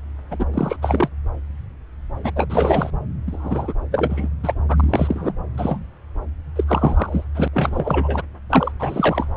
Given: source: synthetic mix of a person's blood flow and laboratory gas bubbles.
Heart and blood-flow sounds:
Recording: Doppler ultrasound of blood flow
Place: subclavian vein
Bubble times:
0.30-0.46 s: bubbles
0.52-0.76 s: bubbles
0.81-1.09 s: bubbles
2.23-2.31 s: bubbles
2.35-2.90 s: bubbles
3.27-3.74 s: bubbles
3.91-4.28 s: bubbles
4.43-4.54 s: bubbles
4.68-5.33 s: bubbles
5.58-5.79 s: bubbles
6.55-6.64 s: bubbles
6.67-7.25 s: bubbles
7.34-7.48 s: bubbles
7.53-8.22 s: bubbles
8.49-8.71 s: bubbles
8.79-9.28 s: bubbles
From the record:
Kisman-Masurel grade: 333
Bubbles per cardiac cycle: rolling drumbeat, 9 or more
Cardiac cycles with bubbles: 50 to 99%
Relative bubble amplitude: loud (0.450 to 0.775)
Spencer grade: 3 (all of the cardiac periods contain showers or single bubble signals, but not dominating or overriding the cardiac motion signals)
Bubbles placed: anywhere in the cardiac cycle

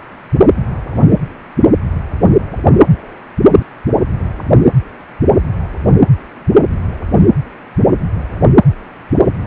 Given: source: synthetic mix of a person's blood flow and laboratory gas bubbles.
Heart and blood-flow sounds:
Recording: Doppler ultrasound of blood flow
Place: precordium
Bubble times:
no bubbles
From the record:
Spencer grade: 0 (complete lack of bubble signals)

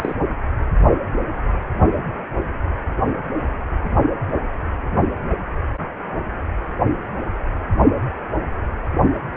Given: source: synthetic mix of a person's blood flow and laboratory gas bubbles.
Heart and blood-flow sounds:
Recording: Doppler ultrasound of blood flow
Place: precordium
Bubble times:
0.00-0.15 s: bubbles
From the record:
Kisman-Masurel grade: 212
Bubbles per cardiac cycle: several, 3 to 8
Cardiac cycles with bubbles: 1 to 10%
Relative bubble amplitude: moderate (0.250 to 0.450)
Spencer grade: 1 (occasional bubble signal discernible with the cardiac motion signal, with majority of cardiac periods free of bubbles)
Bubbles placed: only in the low amplitude regions of the cardiac cycle

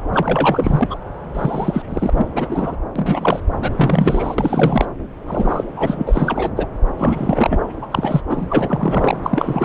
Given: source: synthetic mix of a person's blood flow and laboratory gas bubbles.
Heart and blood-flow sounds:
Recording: Doppler ultrasound of blood flow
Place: subclavian vein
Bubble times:
0.12-0.98 s: bubbles
1.34-1.82 s: bubbles
1.90-2.10 s: bubbles
2.17-2.27 s: bubbles
2.35-2.76 s: bubbles
2.96-3.40 s: bubbles
3.61-4.35 s: bubbles
4.38-4.86 s: bubbles
5.27-5.64 s: bubbles
5.76-6.52 s: bubbles
6.56-6.66 s: bubbles
6.98-7.58 s: bubbles
7.82-7.87 s: bubbles
7.90-8.21 s: bubbles
8.29-9.20 s: bubbles
9.22-9.65 s: bubbles
From the record:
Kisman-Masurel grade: 342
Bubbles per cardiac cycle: rolling drumbeat, 9 or more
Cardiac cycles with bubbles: 100%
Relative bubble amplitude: moderate (0.250 to 0.450)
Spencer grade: 3 (all of the cardiac periods contain showers or single bubble signals, but not dominating or overriding the cardiac motion signals)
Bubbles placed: anywhere in the cardiac cycle

